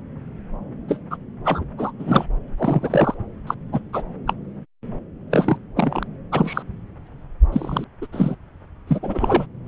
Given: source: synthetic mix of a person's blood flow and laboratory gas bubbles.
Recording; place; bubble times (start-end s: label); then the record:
Doppler ultrasound of blood flow; subclavian vein
0.88-0.97 s: bubbles
1.10-1.17 s: bubbles
1.45-1.64 s: bubbles
1.78-1.92 s: bubbles
1.99-2.26 s: bubbles
2.58-3.15 s: bubbles
3.47-3.54 s: bubbles
3.72-3.79 s: bubbles
3.93-4.02 s: bubbles
4.27-4.33 s: bubbles
5.30-5.57 s: bubbles
5.76-6.03 s: bubbles
6.31-6.62 s: bubbles
7.52-7.84 s: bubbles
8.01-8.06 s: bubbles
8.12-8.36 s: bubbles
8.87-8.99 s: bubbles
9.03-9.46 s: bubbles
From the record:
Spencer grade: 3 (all of the cardiac periods contain showers or single bubble signals, but not dominating or overriding the cardiac motion signals); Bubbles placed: anywhere in the cardiac cycle